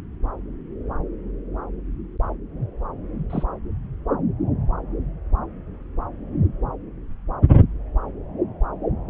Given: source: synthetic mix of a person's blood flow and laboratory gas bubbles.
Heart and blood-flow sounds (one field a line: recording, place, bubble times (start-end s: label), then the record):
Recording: Doppler ultrasound of blood flow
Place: subclavian vein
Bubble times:
3.29-3.44 s: bubbles
From the record:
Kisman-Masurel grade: 112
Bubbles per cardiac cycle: 1 to 2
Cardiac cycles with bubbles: 1 to 10%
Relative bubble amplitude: moderate (0.250 to 0.450)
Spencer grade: 1 (occasional bubble signal discernible with the cardiac motion signal, with majority of cardiac periods free of bubbles)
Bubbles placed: anywhere in the cardiac cycle